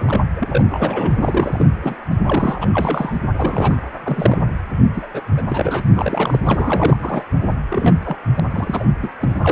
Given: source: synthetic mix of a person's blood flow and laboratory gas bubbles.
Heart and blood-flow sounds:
Doppler ultrasound of blood flow; precordium
0.00-0.20 s: bubbles
0.36-0.65 s: bubbles
0.72-1.17 s: bubbles
1.21-1.67 s: bubbles
1.82-1.96 s: bubbles
2.25-2.70 s: bubbles
2.73-3.19 s: bubbles
3.33-3.81 s: bubbles
4.03-4.38 s: bubbles
4.95-5.09 s: bubbles
5.14-5.22 s: bubbles
5.36-5.42 s: bubbles
5.49-5.88 s: bubbles
5.95-6.39 s: bubbles
6.46-6.96 s: bubbles
7.00-7.23 s: bubbles
7.68-7.96 s: bubbles
8.05-8.17 s: bubbles
8.24-8.40 s: bubbles
8.51-8.87 s: bubbles
9.03-9.09 s: bubbles
9.20-9.35 s: bubbles
9.42-9.52 s: bubbles
From the record:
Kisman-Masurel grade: 242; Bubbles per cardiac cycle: several, 3 to 8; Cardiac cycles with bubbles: 100%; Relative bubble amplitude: moderate (0.250 to 0.450); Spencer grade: 3 (all of the cardiac periods contain showers or single bubble signals, but not dominating or overriding the cardiac motion signals); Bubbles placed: anywhere in the cardiac cycle

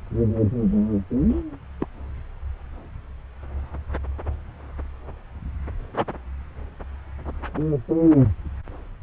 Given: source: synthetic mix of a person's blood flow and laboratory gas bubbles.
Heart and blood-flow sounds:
Doppler ultrasound of blood flow; subclavian vein
1.29-1.43 s: bubbles
1.80-1.88 s: bubbles
From the record:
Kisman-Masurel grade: 121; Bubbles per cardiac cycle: 1 to 2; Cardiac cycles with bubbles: 10 to 50%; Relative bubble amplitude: barely perceptible (0.100 to 0.250); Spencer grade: 2 (many but less than half of the cardiac periods contain bubble signals, singularly or in groups); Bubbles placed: anywhere in the cardiac cycle

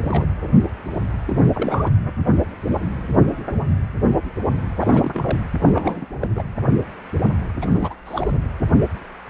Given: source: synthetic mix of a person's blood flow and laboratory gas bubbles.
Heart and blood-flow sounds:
Doppler ultrasound of blood flow; precordium
0.00-0.26 s: bubbles
1.27-1.39 s: bubbles
1.54-1.90 s: bubbles
4.80-5.41 s: bubbles
5.61-6.06 s: bubbles
6.20-6.29 s: bubbles
6.36-6.43 s: bubbles
7.59-7.95 s: bubbles
8.05-8.37 s: bubbles
From the record:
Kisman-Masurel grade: 332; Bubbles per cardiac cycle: rolling drumbeat, 9 or more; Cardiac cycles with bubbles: 50 to 99%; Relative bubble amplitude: moderate (0.250 to 0.450); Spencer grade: 3 (all of the cardiac periods contain showers or single bubble signals, but not dominating or overriding the cardiac motion signals); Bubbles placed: anywhere in the cardiac cycle

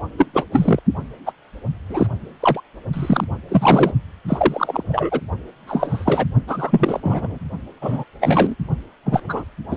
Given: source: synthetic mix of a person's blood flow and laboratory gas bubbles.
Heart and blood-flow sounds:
Doppler ultrasound of blood flow; precordium
0.18-0.26 s: bubbles
0.33-0.45 s: bubbles
0.52-0.80 s: bubbles
1.26-1.32 s: bubbles
1.89-2.07 s: bubbles
2.40-2.60 s: bubbles
2.93-3.24 s: bubbles
3.49-3.92 s: bubbles
4.28-4.83 s: bubbles
4.87-5.21 s: bubbles
5.67-6.27 s: bubbles
6.48-7.00 s: bubbles
7.03-7.38 s: bubbles
7.82-8.04 s: bubbles
8.21-8.55 s: bubbles
9.05-9.44 s: bubbles
9.70-9.77 s: bubbles
From the record:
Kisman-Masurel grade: 243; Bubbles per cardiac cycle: several, 3 to 8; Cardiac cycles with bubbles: 100%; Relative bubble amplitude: loud (0.450 to 0.775); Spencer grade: 3 (all of the cardiac periods contain showers or single bubble signals, but not dominating or overriding the cardiac motion signals); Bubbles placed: only in the low amplitude regions of the cardiac cycle

